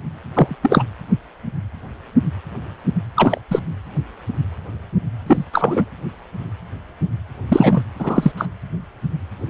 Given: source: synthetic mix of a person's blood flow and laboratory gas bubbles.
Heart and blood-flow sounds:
Doppler ultrasound of blood flow; precordium
0.33-0.57 s: bubbles
0.62-0.83 s: bubbles
3.15-3.41 s: bubbles
3.50-3.60 s: bubbles
5.26-5.45 s: bubbles
5.53-5.85 s: bubbles
7.48-7.83 s: bubbles
7.99-8.32 s: bubbles
8.37-8.46 s: bubbles
From the record:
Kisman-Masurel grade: 223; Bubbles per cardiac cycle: several, 3 to 8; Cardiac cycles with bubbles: 10 to 50%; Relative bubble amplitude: loud (0.450 to 0.775); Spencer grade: 2 (many but less than half of the cardiac periods contain bubble signals, singularly or in groups); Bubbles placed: anywhere in the cardiac cycle

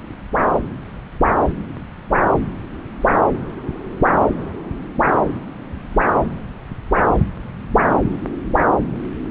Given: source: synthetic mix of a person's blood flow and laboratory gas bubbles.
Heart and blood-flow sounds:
Doppler ultrasound of blood flow; subclavian vein
no bubbles
From the record:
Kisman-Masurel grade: 000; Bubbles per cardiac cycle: 0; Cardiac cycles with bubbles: 0%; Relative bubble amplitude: no bubbles discernible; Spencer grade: 0 (complete lack of bubble signals)

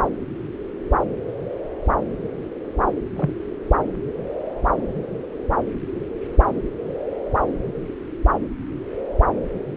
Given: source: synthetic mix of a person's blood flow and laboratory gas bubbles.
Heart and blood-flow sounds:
Doppler ultrasound of blood flow; subclavian vein
3.16-3.29 s: bubbles
From the record:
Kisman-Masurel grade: 112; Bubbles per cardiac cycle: 1 to 2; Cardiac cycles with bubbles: 1 to 10%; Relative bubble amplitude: moderate (0.250 to 0.450); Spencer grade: 1 (occasional bubble signal discernible with the cardiac motion signal, with majority of cardiac periods free of bubbles); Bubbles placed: anywhere in the cardiac cycle

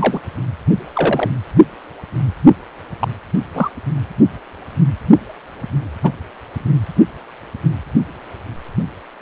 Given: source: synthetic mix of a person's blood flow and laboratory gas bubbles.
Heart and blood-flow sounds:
Doppler ultrasound of blood flow; precordium
0.00-0.20 s: bubbles
0.93-1.29 s: bubbles
3.00-3.13 s: bubbles
3.54-3.69 s: bubbles
6.03-6.12 s: bubbles
From the record:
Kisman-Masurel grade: 123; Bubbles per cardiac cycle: 1 to 2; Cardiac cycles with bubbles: 10 to 50%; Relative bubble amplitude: loud (0.450 to 0.775); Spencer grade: 2 (many but less than half of the cardiac periods contain bubble signals, singularly or in groups); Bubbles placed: anywhere in the cardiac cycle

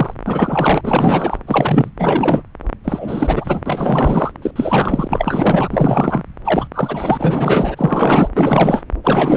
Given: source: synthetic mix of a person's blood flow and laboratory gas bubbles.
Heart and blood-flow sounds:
Doppler ultrasound of blood flow; subclavian vein
0.00-0.14 s: bubbles
0.25-1.38 s: bubbles
1.47-1.91 s: bubbles
1.98-2.43 s: bubbles
2.84-3.61 s: bubbles
3.66-4.31 s: bubbles
4.42-4.51 s: bubbles
4.55-6.23 s: bubbles
6.44-6.67 s: bubbles
6.73-8.29 s: bubbles
8.35-8.83 s: bubbles
9.04-9.36 s: bubbles
From the record:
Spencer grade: 4 (maximum detectable bubble signal sounding continuously throughout systole and diastole of every cardiac period, and overriding the amplitude of the normal cardiac signals); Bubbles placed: anywhere in the cardiac cycle

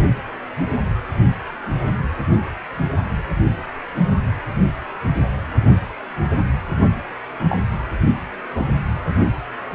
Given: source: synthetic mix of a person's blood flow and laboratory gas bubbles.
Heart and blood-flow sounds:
Doppler ultrasound of blood flow; precordium
7.49-7.65 s: bubbles
From the record:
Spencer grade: 1 (occasional bubble signal discernible with the cardiac motion signal, with majority of cardiac periods free of bubbles); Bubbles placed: only in the low amplitude regions of the cardiac cycle

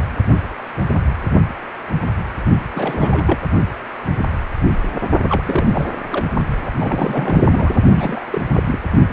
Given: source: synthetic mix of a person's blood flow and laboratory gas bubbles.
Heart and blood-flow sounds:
Doppler ultrasound of blood flow; precordium
2.75-3.38 s: bubbles
5.23-5.87 s: bubbles
6.12-6.26 s: bubbles
6.62-6.71 s: bubbles
6.75-7.82 s: bubbles
7.95-8.26 s: bubbles
8.31-8.41 s: bubbles
8.56-8.63 s: bubbles
8.66-8.79 s: bubbles
From the record:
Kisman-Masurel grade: 332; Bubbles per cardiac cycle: rolling drumbeat, 9 or more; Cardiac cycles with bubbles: 50 to 99%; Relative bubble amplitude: moderate (0.250 to 0.450); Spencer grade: 3 (all of the cardiac periods contain showers or single bubble signals, but not dominating or overriding the cardiac motion signals); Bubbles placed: only in the low amplitude regions of the cardiac cycle

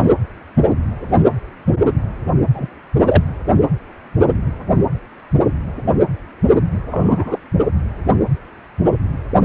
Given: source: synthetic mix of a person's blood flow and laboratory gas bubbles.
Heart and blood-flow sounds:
Doppler ultrasound of blood flow; precordium
1.15-1.23 s: bubbles
2.53-2.69 s: bubbles
3.08-3.23 s: bubbles
6.91-7.39 s: bubbles
From the record:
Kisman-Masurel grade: 123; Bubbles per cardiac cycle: 1 to 2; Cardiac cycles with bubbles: 10 to 50%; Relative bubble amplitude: loud (0.450 to 0.775); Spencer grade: 2 (many but less than half of the cardiac periods contain bubble signals, singularly or in groups); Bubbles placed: anywhere in the cardiac cycle

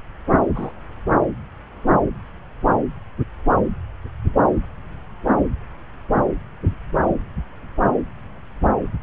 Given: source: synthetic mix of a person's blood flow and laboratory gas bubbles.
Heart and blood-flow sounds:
Doppler ultrasound of blood flow; subclavian vein
0.54-0.72 s: bubbles
From the record:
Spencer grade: 1 (occasional bubble signal discernible with the cardiac motion signal, with majority of cardiac periods free of bubbles); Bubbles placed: anywhere in the cardiac cycle

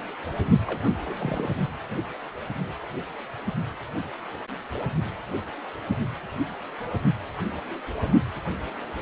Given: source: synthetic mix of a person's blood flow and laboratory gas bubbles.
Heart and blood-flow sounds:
Doppler ultrasound of blood flow; precordium
0.67-0.81 s: bubbles
1.07-1.14 s: bubbles
1.19-1.48 s: bubbles
From the record:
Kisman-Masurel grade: 211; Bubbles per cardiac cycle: several, 3 to 8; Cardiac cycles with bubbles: 1 to 10%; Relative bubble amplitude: barely perceptible (0.100 to 0.250); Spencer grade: 1 (occasional bubble signal discernible with the cardiac motion signal, with majority of cardiac periods free of bubbles); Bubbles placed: only in the low amplitude regions of the cardiac cycle

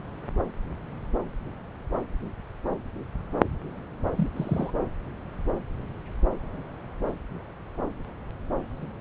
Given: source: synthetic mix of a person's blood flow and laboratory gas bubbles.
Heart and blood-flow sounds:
Doppler ultrasound of blood flow; subclavian vein
4.17-4.29 s: bubbles
4.33-4.71 s: bubbles
From the record:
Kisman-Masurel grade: 211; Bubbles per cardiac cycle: several, 3 to 8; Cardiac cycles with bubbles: 1 to 10%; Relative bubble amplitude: barely perceptible (0.100 to 0.250); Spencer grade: 1 (occasional bubble signal discernible with the cardiac motion signal, with majority of cardiac periods free of bubbles); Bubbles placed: anywhere in the cardiac cycle

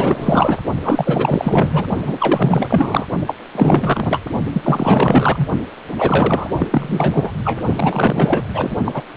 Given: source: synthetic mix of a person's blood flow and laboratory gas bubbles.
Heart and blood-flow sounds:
Doppler ultrasound of blood flow; precordium
0.00-0.58 s: bubbles
0.82-1.86 s: bubbles
1.99-3.05 s: bubbles
3.26-3.35 s: bubbles
3.54-4.20 s: bubbles
4.52-5.48 s: bubbles
5.96-6.51 s: bubbles
6.56-7.32 s: bubbles
7.44-7.62 s: bubbles
7.77-8.45 s: bubbles
8.54-8.76 s: bubbles
8.85-9.02 s: bubbles
From the record:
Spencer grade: 4 (maximum detectable bubble signal sounding continuously throughout systole and diastole of every cardiac period, and overriding the amplitude of the normal cardiac signals); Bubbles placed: only in the low amplitude regions of the cardiac cycle

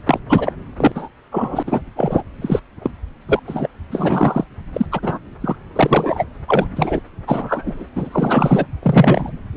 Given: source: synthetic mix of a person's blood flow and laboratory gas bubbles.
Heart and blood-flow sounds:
Doppler ultrasound of blood flow; subclavian vein
0.09-0.19 s: bubbles
0.29-0.53 s: bubbles
0.77-0.92 s: bubbles
0.95-1.08 s: bubbles
1.31-1.63 s: bubbles
1.67-1.81 s: bubbles
1.96-2.23 s: bubbles
2.42-2.60 s: bubbles
2.83-2.91 s: bubbles
3.27-3.40 s: bubbles
3.47-3.69 s: bubbles
3.91-4.44 s: bubbles
4.72-4.86 s: bubbles
4.92-5.18 s: bubbles
5.40-5.55 s: bubbles
5.75-6.24 s: bubbles
6.48-6.66 s: bubbles
6.75-7.00 s: bubbles
7.27-7.86 s: bubbles
7.96-8.66 s: bubbles
8.82-9.31 s: bubbles
From the record:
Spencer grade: 3 (all of the cardiac periods contain showers or single bubble signals, but not dominating or overriding the cardiac motion signals); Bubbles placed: anywhere in the cardiac cycle

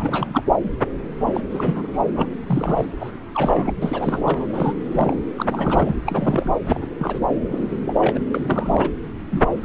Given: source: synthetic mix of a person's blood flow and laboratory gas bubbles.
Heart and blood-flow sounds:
Doppler ultrasound of blood flow; subclavian vein
0.00-0.43 s: bubbles
1.25-1.41 s: bubbles
1.50-2.01 s: bubbles
2.15-2.28 s: bubbles
2.47-2.92 s: bubbles
3.00-3.12 s: bubbles
3.34-3.74 s: bubbles
3.82-4.46 s: bubbles
4.50-4.75 s: bubbles
4.92-5.16 s: bubbles
5.37-5.96 s: bubbles
6.06-6.54 s: bubbles
6.66-6.87 s: bubbles
6.99-7.20 s: bubbles
7.49-7.77 s: bubbles
7.80-8.18 s: bubbles
8.34-8.90 s: bubbles
9.30-9.43 s: bubbles
9.63-9.65 s: bubbles
From the record:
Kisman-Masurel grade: 342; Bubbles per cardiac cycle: rolling drumbeat, 9 or more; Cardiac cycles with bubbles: 100%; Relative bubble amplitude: moderate (0.250 to 0.450); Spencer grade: 3 (all of the cardiac periods contain showers or single bubble signals, but not dominating or overriding the cardiac motion signals); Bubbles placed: anywhere in the cardiac cycle

